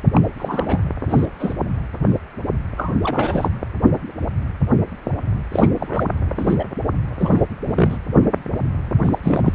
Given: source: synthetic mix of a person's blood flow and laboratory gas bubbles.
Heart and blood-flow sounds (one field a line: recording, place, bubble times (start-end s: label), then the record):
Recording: Doppler ultrasound of blood flow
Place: precordium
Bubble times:
0.12-0.22 s: bubbles
0.39-0.80 s: bubbles
1.06-1.25 s: bubbles
1.40-1.54 s: bubbles
2.77-2.93 s: bubbles
3.04-3.48 s: bubbles
5.52-5.68 s: bubbles
5.80-6.05 s: bubbles
6.38-6.65 s: bubbles
7.19-7.42 s: bubbles
7.65-7.98 s: bubbles
8.99-9.18 s: bubbles
9.23-9.53 s: bubbles
From the record:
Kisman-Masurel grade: 232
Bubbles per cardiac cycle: several, 3 to 8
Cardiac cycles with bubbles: 50 to 99%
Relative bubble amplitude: moderate (0.250 to 0.450)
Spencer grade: 3 (all of the cardiac periods contain showers or single bubble signals, but not dominating or overriding the cardiac motion signals)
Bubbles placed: anywhere in the cardiac cycle